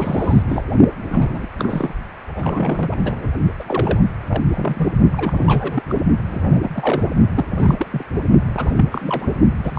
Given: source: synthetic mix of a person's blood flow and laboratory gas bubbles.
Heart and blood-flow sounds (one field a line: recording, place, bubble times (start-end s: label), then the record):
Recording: Doppler ultrasound of blood flow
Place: precordium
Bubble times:
0.00-0.43 s: bubbles
0.49-0.62 s: bubbles
1.09-1.48 s: bubbles
1.57-1.94 s: bubbles
2.35-3.30 s: bubbles
3.59-4.00 s: bubbles
4.29-4.42 s: bubbles
4.51-4.93 s: bubbles
5.12-5.83 s: bubbles
5.88-6.04 s: bubbles
6.27-6.41 s: bubbles
6.51-6.71 s: bubbles
6.75-7.03 s: bubbles
7.34-7.45 s: bubbles
7.58-7.87 s: bubbles
7.92-8.04 s: bubbles
8.56-8.85 s: bubbles
8.91-9.37 s: bubbles
9.63-9.79 s: bubbles
From the record:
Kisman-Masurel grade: 342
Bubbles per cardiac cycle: rolling drumbeat, 9 or more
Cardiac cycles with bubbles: 100%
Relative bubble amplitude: moderate (0.250 to 0.450)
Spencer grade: 3 (all of the cardiac periods contain showers or single bubble signals, but not dominating or overriding the cardiac motion signals)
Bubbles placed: only in the low amplitude regions of the cardiac cycle